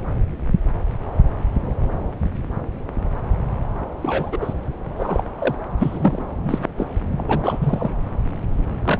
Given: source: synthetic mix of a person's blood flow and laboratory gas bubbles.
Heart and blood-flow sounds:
Doppler ultrasound of blood flow; subclavian vein
4.02-4.54 s: bubbles
4.96-5.22 s: bubbles
5.38-5.55 s: bubbles
5.78-6.25 s: bubbles
6.45-6.59 s: bubbles
6.77-6.87 s: bubbles
7.17-7.90 s: bubbles
8.85-9.00 s: bubbles
From the record:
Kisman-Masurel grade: 223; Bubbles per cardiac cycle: several, 3 to 8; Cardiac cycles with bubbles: 10 to 50%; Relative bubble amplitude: loud (0.450 to 0.775); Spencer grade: 2 (many but less than half of the cardiac periods contain bubble signals, singularly or in groups); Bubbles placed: anywhere in the cardiac cycle

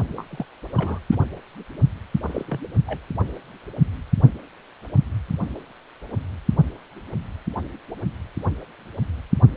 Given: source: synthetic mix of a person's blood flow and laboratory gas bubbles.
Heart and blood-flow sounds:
Doppler ultrasound of blood flow; precordium
0.17-0.26 s: bubbles
0.30-0.45 s: bubbles
0.72-0.99 s: bubbles
1.11-1.18 s: bubbles
2.25-2.44 s: bubbles
2.48-2.60 s: bubbles
2.87-3.01 s: bubbles
From the record:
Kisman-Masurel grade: 221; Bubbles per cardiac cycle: several, 3 to 8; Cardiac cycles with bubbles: 10 to 50%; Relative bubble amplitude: barely perceptible (0.100 to 0.250); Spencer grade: 2 (many but less than half of the cardiac periods contain bubble signals, singularly or in groups); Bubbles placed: only in the low amplitude regions of the cardiac cycle

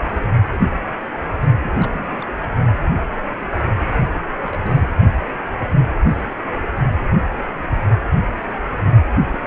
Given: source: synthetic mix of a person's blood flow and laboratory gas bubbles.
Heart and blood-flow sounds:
Doppler ultrasound of blood flow; precordium
1.63-1.71 s: bubbles
1.79-2.30 s: bubbles
2.40-2.53 s: bubbles
4.42-4.91 s: bubbles
9.07-9.14 s: bubbles
9.18-9.47 s: bubbles
From the record:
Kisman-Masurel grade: 221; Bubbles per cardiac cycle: several, 3 to 8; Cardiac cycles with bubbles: 10 to 50%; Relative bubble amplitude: barely perceptible (0.100 to 0.250); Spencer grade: 2 (many but less than half of the cardiac periods contain bubble signals, singularly or in groups); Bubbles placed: only in the low amplitude regions of the cardiac cycle

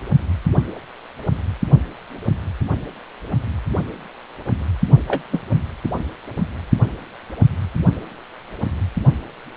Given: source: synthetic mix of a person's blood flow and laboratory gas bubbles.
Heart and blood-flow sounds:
Doppler ultrasound of blood flow; precordium
5.08-5.23 s: bubbles
5.32-5.40 s: bubbles
From the record:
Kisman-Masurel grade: 122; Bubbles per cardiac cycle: 1 to 2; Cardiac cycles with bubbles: 10 to 50%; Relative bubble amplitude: moderate (0.250 to 0.450); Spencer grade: 2 (many but less than half of the cardiac periods contain bubble signals, singularly or in groups); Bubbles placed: anywhere in the cardiac cycle

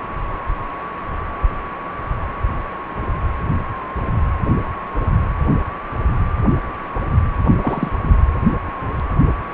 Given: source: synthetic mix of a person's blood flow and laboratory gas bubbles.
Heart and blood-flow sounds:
Doppler ultrasound of blood flow; precordium
7.61-7.91 s: bubbles
From the record:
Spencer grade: 1 (occasional bubble signal discernible with the cardiac motion signal, with majority of cardiac periods free of bubbles); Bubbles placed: anywhere in the cardiac cycle

